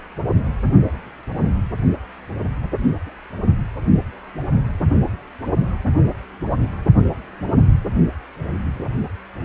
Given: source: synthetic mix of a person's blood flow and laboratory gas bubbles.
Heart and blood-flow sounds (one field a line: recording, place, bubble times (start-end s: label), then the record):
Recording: Doppler ultrasound of blood flow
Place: precordium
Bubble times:
2.80-2.86 s: bubbles
3.05-3.12 s: bubbles
From the record:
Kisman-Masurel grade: 111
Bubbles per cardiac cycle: 1 to 2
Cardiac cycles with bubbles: 1 to 10%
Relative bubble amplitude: barely perceptible (0.100 to 0.250)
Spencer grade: 1 (occasional bubble signal discernible with the cardiac motion signal, with majority of cardiac periods free of bubbles)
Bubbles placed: anywhere in the cardiac cycle